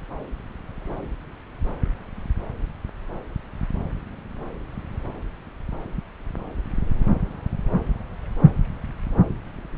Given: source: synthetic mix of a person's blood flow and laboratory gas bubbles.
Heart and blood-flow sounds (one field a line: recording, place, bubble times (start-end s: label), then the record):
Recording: Doppler ultrasound of blood flow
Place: subclavian vein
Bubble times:
no bubbles
From the record:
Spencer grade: 0 (complete lack of bubble signals)